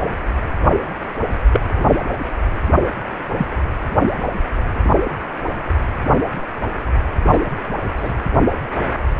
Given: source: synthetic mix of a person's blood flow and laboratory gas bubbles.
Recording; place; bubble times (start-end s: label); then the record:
Doppler ultrasound of blood flow; precordium
1.52-1.61 s: bubbles
3.37-3.46 s: bubbles
7.31-7.46 s: bubbles
7.97-8.14 s: bubbles
From the record:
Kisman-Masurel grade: 122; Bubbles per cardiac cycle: 1 to 2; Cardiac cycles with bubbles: 10 to 50%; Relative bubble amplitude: moderate (0.250 to 0.450); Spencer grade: 2 (many but less than half of the cardiac periods contain bubble signals, singularly or in groups); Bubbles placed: anywhere in the cardiac cycle